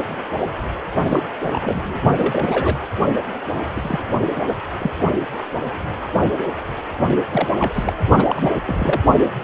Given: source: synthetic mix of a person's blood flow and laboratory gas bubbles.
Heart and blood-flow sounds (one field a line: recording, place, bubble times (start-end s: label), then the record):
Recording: Doppler ultrasound of blood flow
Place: precordium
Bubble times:
1.09-1.23 s: bubbles
1.43-1.98 s: bubbles
2.17-2.79 s: bubbles
3.68-4.00 s: bubbles
4.48-4.54 s: bubbles
4.78-4.91 s: bubbles
7.31-7.48 s: bubbles
7.59-7.93 s: bubbles
8.18-8.51 s: bubbles
8.66-9.01 s: bubbles
From the record:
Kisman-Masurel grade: 232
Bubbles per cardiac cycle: several, 3 to 8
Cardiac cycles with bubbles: 50 to 99%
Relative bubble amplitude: moderate (0.250 to 0.450)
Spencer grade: 3 (all of the cardiac periods contain showers or single bubble signals, but not dominating or overriding the cardiac motion signals)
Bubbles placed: only in the low amplitude regions of the cardiac cycle